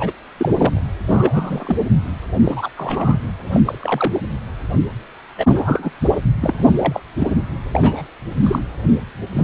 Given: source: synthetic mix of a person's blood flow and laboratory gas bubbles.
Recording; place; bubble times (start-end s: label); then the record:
Doppler ultrasound of blood flow; precordium
0.00-0.12 s: bubbles
0.37-0.83 s: bubbles
1.08-1.78 s: bubbles
2.42-2.69 s: bubbles
2.77-3.18 s: bubbles
3.51-3.62 s: bubbles
3.65-4.20 s: bubbles
5.38-5.91 s: bubbles
6.41-6.63 s: bubbles
6.75-7.00 s: bubbles
7.17-7.29 s: bubbles
7.73-8.02 s: bubbles
8.43-8.59 s: bubbles
9.33-9.44 s: bubbles
From the record:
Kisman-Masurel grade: 242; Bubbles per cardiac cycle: several, 3 to 8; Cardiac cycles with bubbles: 100%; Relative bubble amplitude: moderate (0.250 to 0.450); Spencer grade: 3 (all of the cardiac periods contain showers or single bubble signals, but not dominating or overriding the cardiac motion signals); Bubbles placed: anywhere in the cardiac cycle